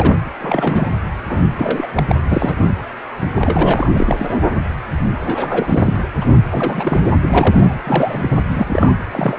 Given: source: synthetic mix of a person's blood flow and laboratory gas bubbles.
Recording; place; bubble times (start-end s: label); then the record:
Doppler ultrasound of blood flow; precordium
0.00-0.20 s: bubbles
0.41-0.92 s: bubbles
1.27-1.41 s: bubbles
1.57-1.86 s: bubbles
1.95-2.04 s: bubbles
2.08-2.16 s: bubbles
2.30-2.73 s: bubbles
3.35-4.45 s: bubbles
5.25-5.97 s: bubbles
6.21-6.37 s: bubbles
6.50-7.00 s: bubbles
7.24-7.78 s: bubbles
7.85-8.37 s: bubbles
8.48-8.97 s: bubbles
9.12-9.39 s: bubbles
From the record:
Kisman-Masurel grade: 332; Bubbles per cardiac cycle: rolling drumbeat, 9 or more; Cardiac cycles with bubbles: 50 to 99%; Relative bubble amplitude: moderate (0.250 to 0.450); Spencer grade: 3 (all of the cardiac periods contain showers or single bubble signals, but not dominating or overriding the cardiac motion signals); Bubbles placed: anywhere in the cardiac cycle